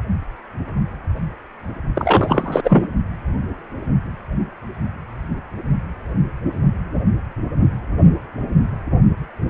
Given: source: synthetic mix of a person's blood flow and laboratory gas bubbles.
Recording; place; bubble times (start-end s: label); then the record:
Doppler ultrasound of blood flow; precordium
1.95-2.88 s: bubbles
From the record:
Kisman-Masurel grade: 213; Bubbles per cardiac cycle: several, 3 to 8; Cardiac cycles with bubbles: 1 to 10%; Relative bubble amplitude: loud (0.450 to 0.775); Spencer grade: 1 (occasional bubble signal discernible with the cardiac motion signal, with majority of cardiac periods free of bubbles); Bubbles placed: only in the low amplitude regions of the cardiac cycle